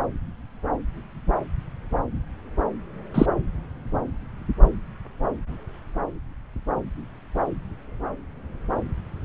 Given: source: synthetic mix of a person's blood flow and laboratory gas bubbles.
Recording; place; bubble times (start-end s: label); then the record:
Doppler ultrasound of blood flow; subclavian vein
3.14-3.26 s: bubbles
From the record:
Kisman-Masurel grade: 113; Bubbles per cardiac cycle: 1 to 2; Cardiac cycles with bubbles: 1 to 10%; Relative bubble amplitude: loud (0.450 to 0.775); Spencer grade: 1 (occasional bubble signal discernible with the cardiac motion signal, with majority of cardiac periods free of bubbles); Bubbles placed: anywhere in the cardiac cycle